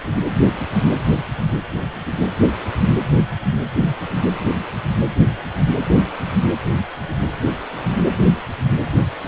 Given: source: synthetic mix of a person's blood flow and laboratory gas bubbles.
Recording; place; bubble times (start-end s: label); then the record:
Doppler ultrasound of blood flow; precordium
6.26-6.32 s: bubbles
From the record:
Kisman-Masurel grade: 111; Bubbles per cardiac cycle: 1 to 2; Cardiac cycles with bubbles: 1 to 10%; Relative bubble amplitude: barely perceptible (0.100 to 0.250); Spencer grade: 1 (occasional bubble signal discernible with the cardiac motion signal, with majority of cardiac periods free of bubbles); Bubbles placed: anywhere in the cardiac cycle